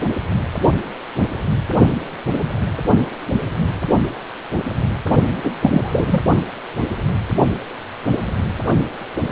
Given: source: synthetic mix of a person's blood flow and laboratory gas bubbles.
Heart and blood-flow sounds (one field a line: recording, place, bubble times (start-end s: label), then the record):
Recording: Doppler ultrasound of blood flow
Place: precordium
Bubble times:
5.43-5.51 s: bubbles
5.60-6.20 s: bubbles
From the record:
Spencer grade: 1 (occasional bubble signal discernible with the cardiac motion signal, with majority of cardiac periods free of bubbles)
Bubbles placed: only in the low amplitude regions of the cardiac cycle